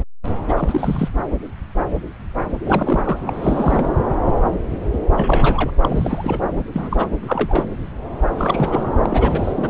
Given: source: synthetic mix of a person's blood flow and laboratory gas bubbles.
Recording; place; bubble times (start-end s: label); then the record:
Doppler ultrasound of blood flow; subclavian vein
0.48-1.08 s: bubbles
2.65-3.18 s: bubbles
3.26-3.88 s: bubbles
5.16-5.71 s: bubbles
5.81-6.39 s: bubbles
6.73-7.06 s: bubbles
7.27-7.65 s: bubbles
8.27-8.84 s: bubbles
9.03-9.70 s: bubbles
From the record:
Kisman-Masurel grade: 332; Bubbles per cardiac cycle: rolling drumbeat, 9 or more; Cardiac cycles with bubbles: 50 to 99%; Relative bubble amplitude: moderate (0.250 to 0.450); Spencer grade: 3 (all of the cardiac periods contain showers or single bubble signals, but not dominating or overriding the cardiac motion signals); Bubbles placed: anywhere in the cardiac cycle